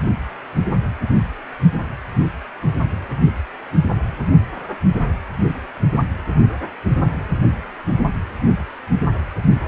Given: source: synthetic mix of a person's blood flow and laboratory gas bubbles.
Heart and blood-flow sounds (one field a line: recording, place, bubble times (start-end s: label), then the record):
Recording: Doppler ultrasound of blood flow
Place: precordium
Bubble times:
no bubbles
From the record:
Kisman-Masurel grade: 000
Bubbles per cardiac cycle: 0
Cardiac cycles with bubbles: 0%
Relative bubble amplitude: no bubbles discernible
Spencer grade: 0 (complete lack of bubble signals)